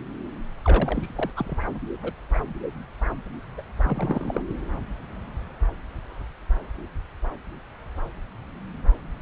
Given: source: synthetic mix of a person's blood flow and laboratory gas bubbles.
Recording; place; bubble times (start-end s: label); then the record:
Doppler ultrasound of blood flow; subclavian vein
0.64-1.14 s: bubbles
1.16-1.30 s: bubbles
1.36-1.56 s: bubbles
2.03-2.10 s: bubbles
2.34-2.40 s: bubbles
3.58-3.62 s: bubbles
3.84-4.42 s: bubbles
From the record:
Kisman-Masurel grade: 221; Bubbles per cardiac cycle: several, 3 to 8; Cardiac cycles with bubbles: 10 to 50%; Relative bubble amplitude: barely perceptible (0.100 to 0.250); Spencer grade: 2 (many but less than half of the cardiac periods contain bubble signals, singularly or in groups); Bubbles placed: anywhere in the cardiac cycle